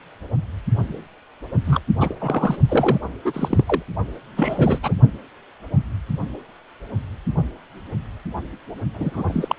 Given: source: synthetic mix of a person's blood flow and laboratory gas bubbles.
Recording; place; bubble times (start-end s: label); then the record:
Doppler ultrasound of blood flow; precordium
1.65-1.80 s: bubbles
2.00-2.15 s: bubbles
2.20-2.56 s: bubbles
2.68-2.98 s: bubbles
3.25-3.82 s: bubbles
4.36-4.79 s: bubbles
4.83-4.94 s: bubbles
8.94-9.24 s: bubbles
9.27-9.55 s: bubbles
From the record:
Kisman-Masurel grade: 332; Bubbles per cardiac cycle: rolling drumbeat, 9 or more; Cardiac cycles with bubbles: 50 to 99%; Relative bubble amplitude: moderate (0.250 to 0.450); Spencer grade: 3 (all of the cardiac periods contain showers or single bubble signals, but not dominating or overriding the cardiac motion signals); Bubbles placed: only in the low amplitude regions of the cardiac cycle